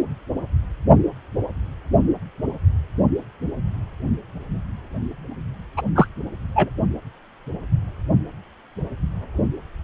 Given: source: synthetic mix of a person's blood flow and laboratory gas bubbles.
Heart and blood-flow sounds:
Doppler ultrasound of blood flow; precordium
5.77-5.82 s: bubbles
5.96-6.07 s: bubbles
6.56-6.69 s: bubbles
From the record:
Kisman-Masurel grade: 213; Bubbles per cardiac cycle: several, 3 to 8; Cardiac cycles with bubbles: 1 to 10%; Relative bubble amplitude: loud (0.450 to 0.775); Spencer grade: 1 (occasional bubble signal discernible with the cardiac motion signal, with majority of cardiac periods free of bubbles); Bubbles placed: only in the low amplitude regions of the cardiac cycle

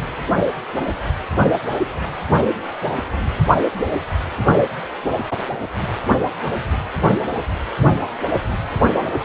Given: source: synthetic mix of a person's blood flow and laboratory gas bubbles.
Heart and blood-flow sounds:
Doppler ultrasound of blood flow; precordium
no bubbles
From the record:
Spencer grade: 0 (complete lack of bubble signals)

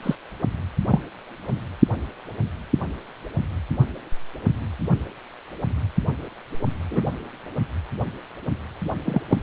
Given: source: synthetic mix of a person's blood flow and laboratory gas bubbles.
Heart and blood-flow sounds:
Doppler ultrasound of blood flow; precordium
0.03-0.15 s: bubbles
0.88-1.02 s: bubbles
6.91-7.01 s: bubbles
9.05-9.21 s: bubbles
9.29-9.37 s: bubbles
From the record:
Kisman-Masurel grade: 123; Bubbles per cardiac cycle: 1 to 2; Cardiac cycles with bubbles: 10 to 50%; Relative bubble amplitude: loud (0.450 to 0.775); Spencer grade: 2 (many but less than half of the cardiac periods contain bubble signals, singularly or in groups); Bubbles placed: only in the low amplitude regions of the cardiac cycle

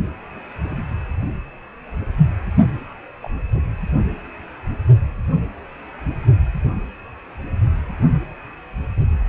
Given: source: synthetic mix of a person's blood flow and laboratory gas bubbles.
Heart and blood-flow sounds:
Doppler ultrasound of blood flow; precordium
3.22-3.31 s: bubbles
From the record:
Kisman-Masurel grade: 111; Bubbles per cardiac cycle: 1 to 2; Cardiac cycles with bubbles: 1 to 10%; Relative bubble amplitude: barely perceptible (0.100 to 0.250); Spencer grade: 1 (occasional bubble signal discernible with the cardiac motion signal, with majority of cardiac periods free of bubbles); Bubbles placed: anywhere in the cardiac cycle

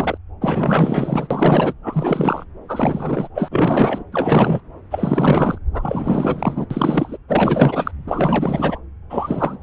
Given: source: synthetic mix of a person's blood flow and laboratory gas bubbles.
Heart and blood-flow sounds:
Doppler ultrasound of blood flow; subclavian vein
0.00-0.18 s: bubbles
0.41-1.27 s: bubbles
1.31-1.73 s: bubbles
1.83-2.44 s: bubbles
2.68-3.28 s: bubbles
3.34-4.04 s: bubbles
4.12-4.61 s: bubbles
4.91-5.58 s: bubbles
5.73-6.67 s: bubbles
6.70-7.17 s: bubbles
7.28-7.92 s: bubbles
8.07-8.79 s: bubbles
9.10-9.58 s: bubbles
From the record:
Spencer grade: 4 (maximum detectable bubble signal sounding continuously throughout systole and diastole of every cardiac period, and overriding the amplitude of the normal cardiac signals); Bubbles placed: anywhere in the cardiac cycle

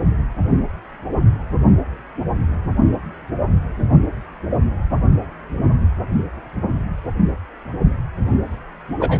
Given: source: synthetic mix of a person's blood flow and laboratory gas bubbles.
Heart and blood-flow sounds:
Doppler ultrasound of blood flow; precordium
9.00-9.20 s: bubbles
From the record:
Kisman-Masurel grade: 123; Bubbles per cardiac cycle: 1 to 2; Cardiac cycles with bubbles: 10 to 50%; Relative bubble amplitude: loud (0.450 to 0.775); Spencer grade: 2 (many but less than half of the cardiac periods contain bubble signals, singularly or in groups); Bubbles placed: anywhere in the cardiac cycle

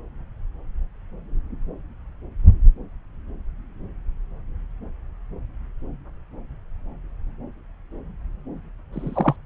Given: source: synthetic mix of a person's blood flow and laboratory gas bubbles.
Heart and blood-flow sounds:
Doppler ultrasound of blood flow; subclavian vein
8.94-9.36 s: bubbles
From the record:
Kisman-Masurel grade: 113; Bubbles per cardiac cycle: 1 to 2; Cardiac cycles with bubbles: 1 to 10%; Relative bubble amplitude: loud (0.450 to 0.775); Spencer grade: 1 (occasional bubble signal discernible with the cardiac motion signal, with majority of cardiac periods free of bubbles); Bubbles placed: anywhere in the cardiac cycle

